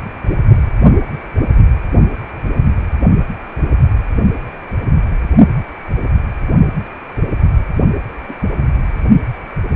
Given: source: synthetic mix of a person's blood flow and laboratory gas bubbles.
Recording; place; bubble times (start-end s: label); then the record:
Doppler ultrasound of blood flow; precordium
8.29-8.34 s: bubbles
From the record:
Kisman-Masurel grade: 122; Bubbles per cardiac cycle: 1 to 2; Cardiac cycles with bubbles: 10 to 50%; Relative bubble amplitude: moderate (0.250 to 0.450); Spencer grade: 2 (many but less than half of the cardiac periods contain bubble signals, singularly or in groups); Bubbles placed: only in the low amplitude regions of the cardiac cycle